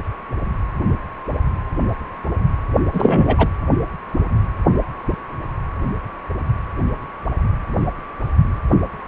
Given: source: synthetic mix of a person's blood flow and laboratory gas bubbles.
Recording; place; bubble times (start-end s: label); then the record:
Doppler ultrasound of blood flow; precordium
2.93-3.49 s: bubbles
From the record:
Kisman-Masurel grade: 213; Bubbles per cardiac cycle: several, 3 to 8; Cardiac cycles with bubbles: 1 to 10%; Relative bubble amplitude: loud (0.450 to 0.775); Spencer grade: 1 (occasional bubble signal discernible with the cardiac motion signal, with majority of cardiac periods free of bubbles); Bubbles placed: anywhere in the cardiac cycle